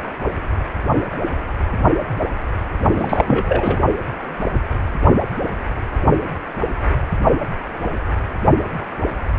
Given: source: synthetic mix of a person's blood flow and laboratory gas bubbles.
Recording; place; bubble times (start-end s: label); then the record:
Doppler ultrasound of blood flow; precordium
2.96-3.23 s: bubbles
3.27-3.79 s: bubbles
From the record:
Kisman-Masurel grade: 213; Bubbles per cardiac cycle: several, 3 to 8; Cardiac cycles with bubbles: 1 to 10%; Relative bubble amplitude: loud (0.450 to 0.775); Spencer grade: 1 (occasional bubble signal discernible with the cardiac motion signal, with majority of cardiac periods free of bubbles); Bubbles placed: only in the low amplitude regions of the cardiac cycle